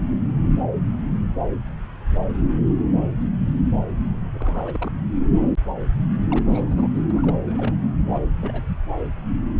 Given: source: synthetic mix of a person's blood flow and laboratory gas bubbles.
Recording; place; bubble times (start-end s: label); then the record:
Doppler ultrasound of blood flow; subclavian vein
4.33-4.92 s: bubbles
6.30-6.88 s: bubbles
6.94-7.02 s: bubbles
7.10-7.38 s: bubbles
7.46-7.74 s: bubbles
8.13-8.21 s: bubbles
8.41-8.62 s: bubbles
8.68-8.77 s: bubbles
From the record:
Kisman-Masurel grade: 221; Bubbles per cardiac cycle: several, 3 to 8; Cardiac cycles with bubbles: 10 to 50%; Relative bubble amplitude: barely perceptible (0.100 to 0.250); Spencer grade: 2 (many but less than half of the cardiac periods contain bubble signals, singularly or in groups); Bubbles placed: anywhere in the cardiac cycle